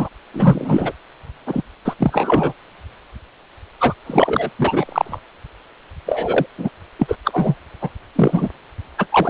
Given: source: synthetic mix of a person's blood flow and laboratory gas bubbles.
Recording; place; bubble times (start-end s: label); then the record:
Doppler ultrasound of blood flow; precordium
0.00-0.09 s: bubbles
0.34-0.92 s: bubbles
1.46-1.62 s: bubbles
1.85-1.96 s: bubbles
1.99-2.53 s: bubbles
3.80-3.94 s: bubbles
4.06-4.50 s: bubbles
4.59-5.20 s: bubbles
6.06-6.46 s: bubbles
6.57-6.70 s: bubbles
6.99-7.16 s: bubbles
7.24-7.54 s: bubbles
7.81-7.89 s: bubbles
8.15-8.49 s: bubbles
8.98-9.06 s: bubbles
9.12-9.30 s: bubbles
From the record:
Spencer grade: 3 (all of the cardiac periods contain showers or single bubble signals, but not dominating or overriding the cardiac motion signals); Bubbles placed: anywhere in the cardiac cycle